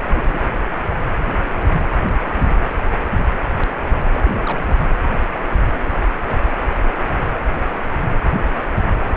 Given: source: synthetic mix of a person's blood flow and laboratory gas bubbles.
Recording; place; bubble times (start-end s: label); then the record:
Doppler ultrasound of blood flow; precordium
0.00-0.02 s: bubbles
0.15-0.22 s: bubbles
0.26-0.41 s: bubbles
4.14-4.21 s: bubbles
4.24-4.75 s: bubbles
From the record:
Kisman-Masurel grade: 211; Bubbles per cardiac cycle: several, 3 to 8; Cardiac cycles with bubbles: 1 to 10%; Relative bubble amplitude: barely perceptible (0.100 to 0.250); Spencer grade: 1 (occasional bubble signal discernible with the cardiac motion signal, with majority of cardiac periods free of bubbles); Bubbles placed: anywhere in the cardiac cycle